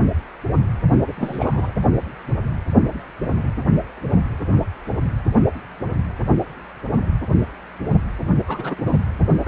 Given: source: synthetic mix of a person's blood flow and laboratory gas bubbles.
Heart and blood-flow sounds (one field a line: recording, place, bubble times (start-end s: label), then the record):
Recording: Doppler ultrasound of blood flow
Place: precordium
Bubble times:
1.07-1.73 s: bubbles
8.47-8.75 s: bubbles
8.78-9.01 s: bubbles
9.45-9.48 s: bubbles
From the record:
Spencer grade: 2 (many but less than half of the cardiac periods contain bubble signals, singularly or in groups)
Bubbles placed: only in the low amplitude regions of the cardiac cycle